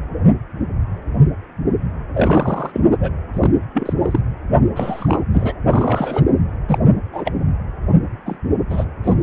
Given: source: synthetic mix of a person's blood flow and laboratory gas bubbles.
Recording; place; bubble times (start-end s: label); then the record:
Doppler ultrasound of blood flow; precordium
2.14-2.81 s: bubbles
2.90-2.97 s: bubbles
3.00-3.12 s: bubbles
3.33-3.51 s: bubbles
3.74-3.93 s: bubbles
4.02-4.19 s: bubbles
4.75-5.21 s: bubbles
5.33-5.54 s: bubbles
5.67-6.21 s: bubbles
6.68-6.78 s: bubbles
7.12-7.32 s: bubbles
8.25-8.38 s: bubbles
8.70-8.85 s: bubbles
9.04-9.13 s: bubbles
From the record:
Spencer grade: 3 (all of the cardiac periods contain showers or single bubble signals, but not dominating or overriding the cardiac motion signals); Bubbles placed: anywhere in the cardiac cycle